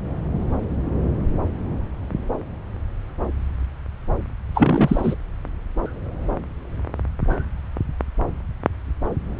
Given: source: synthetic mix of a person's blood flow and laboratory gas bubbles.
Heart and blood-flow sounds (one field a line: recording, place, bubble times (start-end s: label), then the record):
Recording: Doppler ultrasound of blood flow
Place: subclavian vein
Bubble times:
4.54-5.15 s: bubbles
From the record:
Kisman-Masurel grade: 213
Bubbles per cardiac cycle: several, 3 to 8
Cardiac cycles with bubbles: 1 to 10%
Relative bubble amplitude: loud (0.450 to 0.775)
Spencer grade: 1 (occasional bubble signal discernible with the cardiac motion signal, with majority of cardiac periods free of bubbles)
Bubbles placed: anywhere in the cardiac cycle